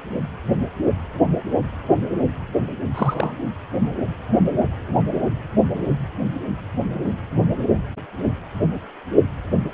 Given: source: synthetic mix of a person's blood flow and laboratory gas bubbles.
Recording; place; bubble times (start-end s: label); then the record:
Doppler ultrasound of blood flow; precordium
2.94-3.35 s: bubbles
From the record:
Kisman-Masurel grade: 212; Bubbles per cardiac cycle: several, 3 to 8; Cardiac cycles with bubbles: 1 to 10%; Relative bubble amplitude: moderate (0.250 to 0.450); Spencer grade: 1 (occasional bubble signal discernible with the cardiac motion signal, with majority of cardiac periods free of bubbles); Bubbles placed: anywhere in the cardiac cycle